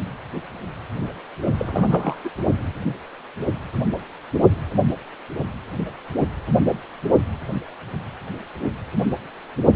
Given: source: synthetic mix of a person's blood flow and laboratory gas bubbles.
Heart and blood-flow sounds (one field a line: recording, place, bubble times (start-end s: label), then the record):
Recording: Doppler ultrasound of blood flow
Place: precordium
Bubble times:
1.58-2.17 s: bubbles
2.24-2.29 s: bubbles
From the record:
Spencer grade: 1 (occasional bubble signal discernible with the cardiac motion signal, with majority of cardiac periods free of bubbles)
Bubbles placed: only in the low amplitude regions of the cardiac cycle